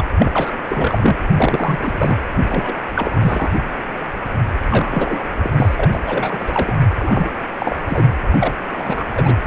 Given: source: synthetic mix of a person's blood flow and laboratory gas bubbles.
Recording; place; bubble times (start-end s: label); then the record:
Doppler ultrasound of blood flow; precordium
0.00-0.05 s: bubbles
0.19-0.57 s: bubbles
0.68-1.17 s: bubbles
1.36-2.17 s: bubbles
2.49-2.78 s: bubbles
2.94-3.52 s: bubbles
4.69-5.25 s: bubbles
5.43-5.50 s: bubbles
5.57-6.78 s: bubbles
6.98-7.33 s: bubbles
7.58-7.78 s: bubbles
7.87-8.07 s: bubbles
8.32-8.54 s: bubbles
8.77-9.35 s: bubbles
From the record:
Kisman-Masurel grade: 332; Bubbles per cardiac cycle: rolling drumbeat, 9 or more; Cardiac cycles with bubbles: 50 to 99%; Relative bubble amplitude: moderate (0.250 to 0.450); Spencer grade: 3 (all of the cardiac periods contain showers or single bubble signals, but not dominating or overriding the cardiac motion signals); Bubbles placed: anywhere in the cardiac cycle